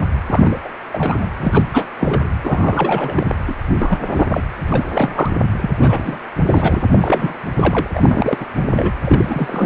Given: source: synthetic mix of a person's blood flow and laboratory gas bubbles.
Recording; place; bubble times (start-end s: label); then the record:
Doppler ultrasound of blood flow; precordium
0.26-0.59 s: bubbles
0.64-0.68 s: bubbles
0.92-1.27 s: bubbles
1.38-1.64 s: bubbles
1.73-1.86 s: bubbles
1.99-2.28 s: bubbles
2.44-3.35 s: bubbles
3.47-3.55 s: bubbles
3.79-4.26 s: bubbles
4.29-4.42 s: bubbles
4.68-5.31 s: bubbles
5.60-5.77 s: bubbles
5.80-6.18 s: bubbles
6.47-6.87 s: bubbles
6.92-7.34 s: bubbles
7.56-7.88 s: bubbles
7.94-8.46 s: bubbles
8.58-8.92 s: bubbles
9.03-9.66 s: bubbles
From the record:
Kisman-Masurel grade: 343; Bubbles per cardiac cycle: rolling drumbeat, 9 or more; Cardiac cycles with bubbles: 100%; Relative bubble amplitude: loud (0.450 to 0.775); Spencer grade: 3 (all of the cardiac periods contain showers or single bubble signals, but not dominating or overriding the cardiac motion signals); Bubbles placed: anywhere in the cardiac cycle